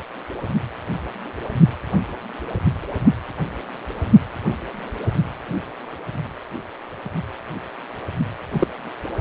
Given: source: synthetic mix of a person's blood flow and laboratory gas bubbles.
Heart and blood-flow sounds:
Doppler ultrasound of blood flow; precordium
8.51-8.68 s: bubbles
From the record:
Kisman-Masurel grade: 113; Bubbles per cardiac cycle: 1 to 2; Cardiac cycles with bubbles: 1 to 10%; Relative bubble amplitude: loud (0.450 to 0.775); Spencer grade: 1 (occasional bubble signal discernible with the cardiac motion signal, with majority of cardiac periods free of bubbles); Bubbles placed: anywhere in the cardiac cycle

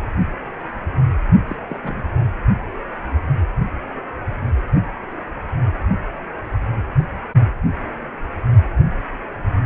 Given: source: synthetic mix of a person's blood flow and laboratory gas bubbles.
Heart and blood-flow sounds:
Doppler ultrasound of blood flow; precordium
1.47-1.56 s: bubbles
1.69-1.79 s: bubbles
1.83-2.02 s: bubbles
From the record:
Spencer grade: 1 (occasional bubble signal discernible with the cardiac motion signal, with majority of cardiac periods free of bubbles); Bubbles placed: only in the low amplitude regions of the cardiac cycle

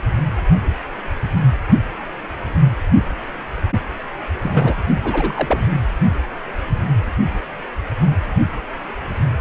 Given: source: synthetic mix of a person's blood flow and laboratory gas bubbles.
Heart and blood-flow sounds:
Doppler ultrasound of blood flow; precordium
4.42-4.76 s: bubbles
5.03-5.68 s: bubbles
From the record:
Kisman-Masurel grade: 222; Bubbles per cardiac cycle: several, 3 to 8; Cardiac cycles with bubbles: 10 to 50%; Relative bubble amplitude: moderate (0.250 to 0.450); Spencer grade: 2 (many but less than half of the cardiac periods contain bubble signals, singularly or in groups); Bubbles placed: anywhere in the cardiac cycle

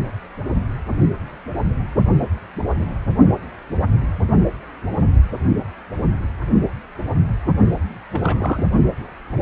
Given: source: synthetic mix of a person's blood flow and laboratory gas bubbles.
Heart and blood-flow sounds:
Doppler ultrasound of blood flow; precordium
8.11-8.65 s: bubbles
From the record:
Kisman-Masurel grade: 212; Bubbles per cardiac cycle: several, 3 to 8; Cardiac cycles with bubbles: 1 to 10%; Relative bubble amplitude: moderate (0.250 to 0.450); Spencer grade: 1 (occasional bubble signal discernible with the cardiac motion signal, with majority of cardiac periods free of bubbles); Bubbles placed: only in the low amplitude regions of the cardiac cycle

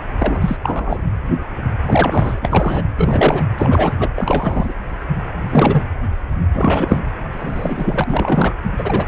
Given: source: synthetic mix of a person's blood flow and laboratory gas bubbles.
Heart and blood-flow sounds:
Doppler ultrasound of blood flow; precordium
0.18-0.56 s: bubbles
0.63-1.02 s: bubbles
1.86-2.82 s: bubbles
2.96-3.46 s: bubbles
3.58-4.73 s: bubbles
5.45-5.83 s: bubbles
6.54-7.02 s: bubbles
7.33-8.04 s: bubbles
8.08-8.55 s: bubbles
8.78-9.07 s: bubbles
From the record:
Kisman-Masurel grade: 333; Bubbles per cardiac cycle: rolling drumbeat, 9 or more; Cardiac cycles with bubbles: 50 to 99%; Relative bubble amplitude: loud (0.450 to 0.775); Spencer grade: 3 (all of the cardiac periods contain showers or single bubble signals, but not dominating or overriding the cardiac motion signals); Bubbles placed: anywhere in the cardiac cycle

